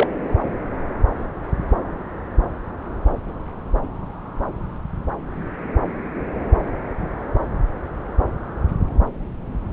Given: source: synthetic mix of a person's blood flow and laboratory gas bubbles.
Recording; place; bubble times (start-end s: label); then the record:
Doppler ultrasound of blood flow; subclavian vein
0.00-0.07 s: bubbles
From the record:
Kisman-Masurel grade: 113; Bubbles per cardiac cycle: 1 to 2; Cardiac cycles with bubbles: 1 to 10%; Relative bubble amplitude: loud (0.450 to 0.775); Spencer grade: 1 (occasional bubble signal discernible with the cardiac motion signal, with majority of cardiac periods free of bubbles); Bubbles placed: anywhere in the cardiac cycle